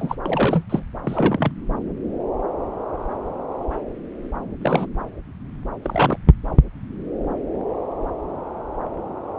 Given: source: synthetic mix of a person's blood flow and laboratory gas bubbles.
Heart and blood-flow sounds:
Doppler ultrasound of blood flow; subclavian vein
0.00-0.15 s: bubbles
0.26-0.64 s: bubbles
0.70-0.83 s: bubbles
1.03-1.52 s: bubbles
4.61-4.86 s: bubbles
5.82-6.18 s: bubbles
From the record:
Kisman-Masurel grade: 222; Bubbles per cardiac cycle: several, 3 to 8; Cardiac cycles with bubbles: 10 to 50%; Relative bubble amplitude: moderate (0.250 to 0.450); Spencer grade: 2 (many but less than half of the cardiac periods contain bubble signals, singularly or in groups); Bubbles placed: anywhere in the cardiac cycle

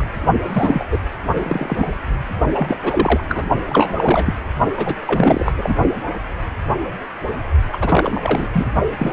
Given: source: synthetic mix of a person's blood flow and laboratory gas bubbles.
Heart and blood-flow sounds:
Doppler ultrasound of blood flow; precordium
0.00-0.05 s: bubbles
0.48-0.84 s: bubbles
0.92-0.98 s: bubbles
1.39-1.97 s: bubbles
2.52-2.79 s: bubbles
2.84-3.21 s: bubbles
3.29-3.46 s: bubbles
3.69-4.35 s: bubbles
4.77-4.95 s: bubbles
5.07-5.53 s: bubbles
5.58-5.75 s: bubbles
7.73-7.77 s: bubbles
7.81-8.48 s: bubbles
8.52-8.67 s: bubbles
8.98-9.13 s: bubbles
From the record:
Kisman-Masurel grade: 333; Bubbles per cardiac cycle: rolling drumbeat, 9 or more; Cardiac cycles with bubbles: 50 to 99%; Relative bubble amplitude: loud (0.450 to 0.775); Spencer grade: 3 (all of the cardiac periods contain showers or single bubble signals, but not dominating or overriding the cardiac motion signals); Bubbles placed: only in the low amplitude regions of the cardiac cycle

